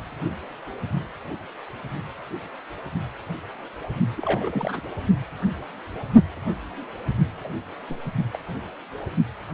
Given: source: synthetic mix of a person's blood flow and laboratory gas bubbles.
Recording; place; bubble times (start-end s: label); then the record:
Doppler ultrasound of blood flow; precordium
4.16-4.81 s: bubbles
7.43-7.50 s: bubbles
7.90-7.97 s: bubbles
8.34-8.39 s: bubbles
From the record:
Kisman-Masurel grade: 221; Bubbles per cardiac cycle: several, 3 to 8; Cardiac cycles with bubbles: 10 to 50%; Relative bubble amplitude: barely perceptible (0.100 to 0.250); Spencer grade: 2 (many but less than half of the cardiac periods contain bubble signals, singularly or in groups); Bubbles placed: only in the low amplitude regions of the cardiac cycle